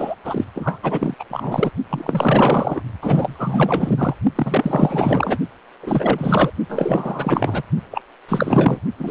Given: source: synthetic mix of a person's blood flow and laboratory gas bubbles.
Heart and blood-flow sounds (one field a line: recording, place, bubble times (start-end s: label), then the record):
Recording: Doppler ultrasound of blood flow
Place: precordium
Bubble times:
0.00-0.14 s: bubbles
0.25-0.45 s: bubbles
0.54-0.79 s: bubbles
0.82-1.14 s: bubbles
1.19-1.24 s: bubbles
1.30-1.71 s: bubbles
1.90-2.81 s: bubbles
3.02-4.15 s: bubbles
4.35-5.38 s: bubbles
5.82-6.51 s: bubbles
6.69-7.63 s: bubbles
7.91-8.02 s: bubbles
8.29-8.79 s: bubbles
8.97-9.11 s: bubbles
From the record:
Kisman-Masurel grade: 444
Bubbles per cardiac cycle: continuous sound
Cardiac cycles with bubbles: 100%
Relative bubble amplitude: maximal (0.775 to 0.999)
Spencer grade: 4 (maximum detectable bubble signal sounding continuously throughout systole and diastole of every cardiac period, and overriding the amplitude of the normal cardiac signals)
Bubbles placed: only in the low amplitude regions of the cardiac cycle